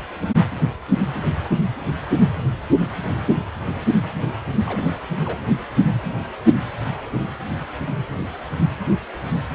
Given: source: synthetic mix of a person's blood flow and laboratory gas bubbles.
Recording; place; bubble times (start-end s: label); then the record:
Doppler ultrasound of blood flow; precordium
4.66-4.93 s: bubbles
5.25-5.38 s: bubbles
From the record:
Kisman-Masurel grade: 211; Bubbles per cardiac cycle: several, 3 to 8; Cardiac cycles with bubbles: 1 to 10%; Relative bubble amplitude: barely perceptible (0.100 to 0.250); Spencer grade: 1 (occasional bubble signal discernible with the cardiac motion signal, with majority of cardiac periods free of bubbles); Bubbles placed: anywhere in the cardiac cycle